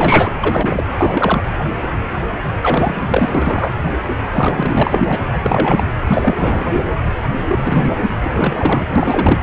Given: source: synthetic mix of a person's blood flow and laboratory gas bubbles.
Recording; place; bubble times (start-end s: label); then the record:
Doppler ultrasound of blood flow; precordium
0.00-0.32 s: bubbles
0.39-0.85 s: bubbles
0.97-1.43 s: bubbles
2.62-3.29 s: bubbles
3.34-3.74 s: bubbles
4.31-5.22 s: bubbles
5.28-5.38 s: bubbles
5.42-5.83 s: bubbles
6.06-6.66 s: bubbles
7.48-7.93 s: bubbles
8.21-8.87 s: bubbles
8.96-9.40 s: bubbles
From the record:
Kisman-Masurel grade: 333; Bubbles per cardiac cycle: rolling drumbeat, 9 or more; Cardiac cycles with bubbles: 50 to 99%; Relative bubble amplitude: loud (0.450 to 0.775); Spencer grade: 3 (all of the cardiac periods contain showers or single bubble signals, but not dominating or overriding the cardiac motion signals); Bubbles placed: anywhere in the cardiac cycle